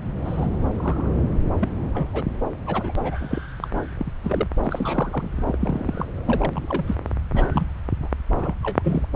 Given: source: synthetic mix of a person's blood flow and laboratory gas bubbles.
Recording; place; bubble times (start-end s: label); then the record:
Doppler ultrasound of blood flow; subclavian vein
0.24-0.48 s: bubbles
0.76-1.29 s: bubbles
1.60-1.69 s: bubbles
1.94-2.08 s: bubbles
2.13-2.24 s: bubbles
2.66-2.93 s: bubbles
3.00-3.18 s: bubbles
3.20-3.40 s: bubbles
3.62-3.68 s: bubbles
3.97-4.12 s: bubbles
4.23-4.47 s: bubbles
4.63-5.29 s: bubbles
5.46-5.57 s: bubbles
5.60-6.05 s: bubbles
6.26-6.95 s: bubbles
7.33-7.45 s: bubbles
7.52-7.68 s: bubbles
8.02-8.10 s: bubbles
8.35-8.54 s: bubbles
8.62-9.07 s: bubbles
From the record:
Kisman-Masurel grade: 242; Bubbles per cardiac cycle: several, 3 to 8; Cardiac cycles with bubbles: 100%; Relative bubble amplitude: moderate (0.250 to 0.450); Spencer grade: 3 (all of the cardiac periods contain showers or single bubble signals, but not dominating or overriding the cardiac motion signals); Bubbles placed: anywhere in the cardiac cycle